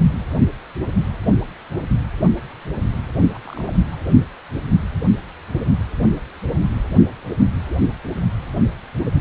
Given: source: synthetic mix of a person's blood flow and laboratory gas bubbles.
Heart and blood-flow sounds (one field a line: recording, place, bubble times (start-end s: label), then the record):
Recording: Doppler ultrasound of blood flow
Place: precordium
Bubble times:
3.34-3.38 s: bubbles
3.45-3.72 s: bubbles
3.88-3.96 s: bubbles
From the record:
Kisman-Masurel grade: 221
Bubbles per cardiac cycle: several, 3 to 8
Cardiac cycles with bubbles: 10 to 50%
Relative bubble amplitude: barely perceptible (0.100 to 0.250)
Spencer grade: 2 (many but less than half of the cardiac periods contain bubble signals, singularly or in groups)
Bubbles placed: only in the low amplitude regions of the cardiac cycle